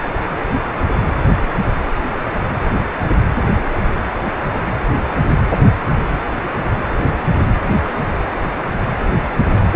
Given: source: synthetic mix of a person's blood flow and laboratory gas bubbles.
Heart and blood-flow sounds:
Doppler ultrasound of blood flow; precordium
6.98-7.31 s: bubbles
9.43-9.52 s: bubbles
9.57-9.68 s: bubbles
From the record:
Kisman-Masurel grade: 121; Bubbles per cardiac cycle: 1 to 2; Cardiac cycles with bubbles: 10 to 50%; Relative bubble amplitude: barely perceptible (0.100 to 0.250); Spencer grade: 2 (many but less than half of the cardiac periods contain bubble signals, singularly or in groups); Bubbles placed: anywhere in the cardiac cycle

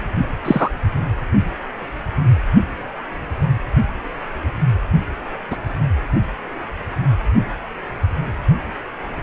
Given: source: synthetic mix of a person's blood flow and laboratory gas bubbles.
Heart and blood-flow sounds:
Doppler ultrasound of blood flow; precordium
0.45-0.69 s: bubbles
5.50-5.57 s: bubbles
From the record:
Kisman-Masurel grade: 123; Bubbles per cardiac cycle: 1 to 2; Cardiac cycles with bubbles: 10 to 50%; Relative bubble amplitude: loud (0.450 to 0.775); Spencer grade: 2 (many but less than half of the cardiac periods contain bubble signals, singularly or in groups); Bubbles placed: only in the low amplitude regions of the cardiac cycle

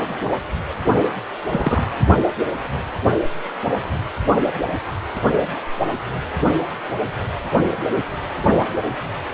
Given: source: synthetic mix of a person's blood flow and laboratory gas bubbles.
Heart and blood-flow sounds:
Doppler ultrasound of blood flow; precordium
1.49-1.91 s: bubbles
From the record:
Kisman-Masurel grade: 113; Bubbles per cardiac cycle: 1 to 2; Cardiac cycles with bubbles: 1 to 10%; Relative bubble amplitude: loud (0.450 to 0.775); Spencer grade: 1 (occasional bubble signal discernible with the cardiac motion signal, with majority of cardiac periods free of bubbles); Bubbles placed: only in the low amplitude regions of the cardiac cycle

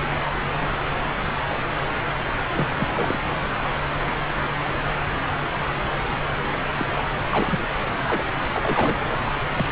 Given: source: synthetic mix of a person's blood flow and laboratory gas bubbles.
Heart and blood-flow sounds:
Doppler ultrasound of blood flow; subclavian vein
2.55-2.67 s: bubbles
2.78-3.19 s: bubbles
6.78-6.85 s: bubbles
6.98-7.03 s: bubbles
7.31-7.60 s: bubbles
8.06-8.26 s: bubbles
8.53-8.99 s: bubbles
9.09-9.17 s: bubbles
9.24-9.30 s: bubbles
9.42-9.46 s: bubbles
9.56-9.67 s: bubbles
From the record:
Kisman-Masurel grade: 221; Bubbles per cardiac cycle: several, 3 to 8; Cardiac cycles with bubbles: 10 to 50%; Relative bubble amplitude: barely perceptible (0.100 to 0.250); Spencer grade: 2 (many but less than half of the cardiac periods contain bubble signals, singularly or in groups); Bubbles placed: anywhere in the cardiac cycle

